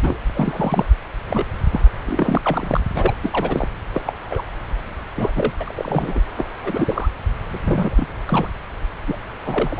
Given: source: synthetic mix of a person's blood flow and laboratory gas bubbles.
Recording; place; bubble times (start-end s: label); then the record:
Doppler ultrasound of blood flow; subclavian vein
0.01-0.18 s: bubbles
0.34-0.85 s: bubbles
1.27-1.46 s: bubbles
1.72-1.80 s: bubbles
2.06-2.81 s: bubbles
2.94-3.16 s: bubbles
3.23-3.68 s: bubbles
3.93-4.02 s: bubbles
4.06-4.12 s: bubbles
4.30-4.42 s: bubbles
5.16-5.32 s: bubbles
5.35-5.53 s: bubbles
5.58-6.20 s: bubbles
6.38-6.45 s: bubbles
6.58-7.09 s: bubbles
7.49-8.06 s: bubbles
8.27-8.47 s: bubbles
9.07-9.18 s: bubbles
9.45-9.80 s: bubbles
From the record:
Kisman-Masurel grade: 242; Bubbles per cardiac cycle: several, 3 to 8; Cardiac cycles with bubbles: 100%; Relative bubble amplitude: moderate (0.250 to 0.450); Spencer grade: 3 (all of the cardiac periods contain showers or single bubble signals, but not dominating or overriding the cardiac motion signals); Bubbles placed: anywhere in the cardiac cycle